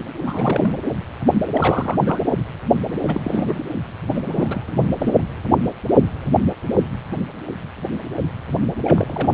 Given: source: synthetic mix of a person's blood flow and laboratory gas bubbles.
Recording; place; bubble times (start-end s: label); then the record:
Doppler ultrasound of blood flow; precordium
0.24-0.79 s: bubbles
1.54-1.96 s: bubbles
2.02-2.19 s: bubbles
3.07-3.21 s: bubbles
3.24-3.59 s: bubbles
4.15-4.22 s: bubbles
4.26-4.63 s: bubbles
4.67-4.72 s: bubbles
4.81-4.87 s: bubbles
4.98-5.14 s: bubbles
8.83-9.34 s: bubbles
From the record:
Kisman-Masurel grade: 332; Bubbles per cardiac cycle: rolling drumbeat, 9 or more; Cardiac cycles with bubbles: 50 to 99%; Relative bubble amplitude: moderate (0.250 to 0.450); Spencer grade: 3 (all of the cardiac periods contain showers or single bubble signals, but not dominating or overriding the cardiac motion signals); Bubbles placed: anywhere in the cardiac cycle